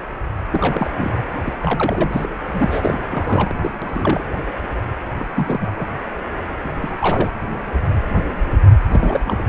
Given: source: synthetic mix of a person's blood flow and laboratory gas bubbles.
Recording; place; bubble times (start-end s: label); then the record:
Doppler ultrasound of blood flow; precordium
0.51-0.91 s: bubbles
0.97-1.11 s: bubbles
1.45-1.53 s: bubbles
1.59-2.29 s: bubbles
2.54-3.00 s: bubbles
3.10-3.58 s: bubbles
3.62-3.71 s: bubbles
3.81-4.24 s: bubbles
5.19-5.30 s: bubbles
5.35-5.72 s: bubbles
5.79-5.85 s: bubbles
6.64-6.68 s: bubbles
6.81-6.93 s: bubbles
6.99-7.30 s: bubbles
8.90-9.21 s: bubbles
9.25-9.43 s: bubbles
From the record:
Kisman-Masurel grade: 332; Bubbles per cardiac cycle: rolling drumbeat, 9 or more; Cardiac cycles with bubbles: 50 to 99%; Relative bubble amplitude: moderate (0.250 to 0.450); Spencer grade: 3 (all of the cardiac periods contain showers or single bubble signals, but not dominating or overriding the cardiac motion signals); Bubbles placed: anywhere in the cardiac cycle